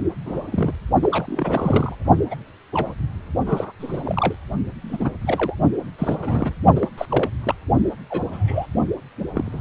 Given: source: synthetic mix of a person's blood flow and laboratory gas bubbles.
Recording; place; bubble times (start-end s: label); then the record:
Doppler ultrasound of blood flow; precordium
0.25-0.76 s: bubbles
1.02-1.95 s: bubbles
2.30-2.35 s: bubbles
2.72-2.92 s: bubbles
3.46-3.72 s: bubbles
3.79-4.35 s: bubbles
4.82-5.56 s: bubbles
5.98-6.54 s: bubbles
6.75-6.89 s: bubbles
6.98-7.06 s: bubbles
7.09-7.29 s: bubbles
7.44-7.55 s: bubbles
8.10-8.22 s: bubbles
8.32-8.66 s: bubbles
9.33-9.61 s: bubbles
From the record:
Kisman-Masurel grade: 242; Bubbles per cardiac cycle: several, 3 to 8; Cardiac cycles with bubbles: 100%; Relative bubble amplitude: moderate (0.250 to 0.450); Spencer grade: 3 (all of the cardiac periods contain showers or single bubble signals, but not dominating or overriding the cardiac motion signals); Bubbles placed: only in the low amplitude regions of the cardiac cycle